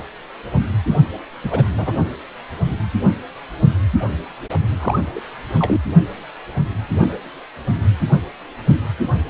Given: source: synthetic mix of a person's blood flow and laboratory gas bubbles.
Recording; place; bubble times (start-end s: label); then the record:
Doppler ultrasound of blood flow; precordium
1.43-1.64 s: bubbles
1.77-1.93 s: bubbles
4.79-5.00 s: bubbles
5.15-5.21 s: bubbles
5.58-5.80 s: bubbles
From the record:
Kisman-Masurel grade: 222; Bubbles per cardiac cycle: several, 3 to 8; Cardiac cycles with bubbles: 10 to 50%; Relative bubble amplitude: moderate (0.250 to 0.450); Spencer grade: 2 (many but less than half of the cardiac periods contain bubble signals, singularly or in groups); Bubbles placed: only in the low amplitude regions of the cardiac cycle